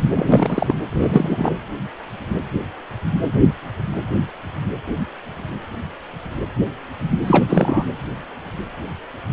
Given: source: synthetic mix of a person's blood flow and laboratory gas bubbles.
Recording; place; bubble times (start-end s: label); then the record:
Doppler ultrasound of blood flow; precordium
0.16-0.76 s: bubbles
0.90-1.56 s: bubbles
7.27-7.45 s: bubbles
7.48-7.84 s: bubbles
From the record:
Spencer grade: 2 (many but less than half of the cardiac periods contain bubble signals, singularly or in groups); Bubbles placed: anywhere in the cardiac cycle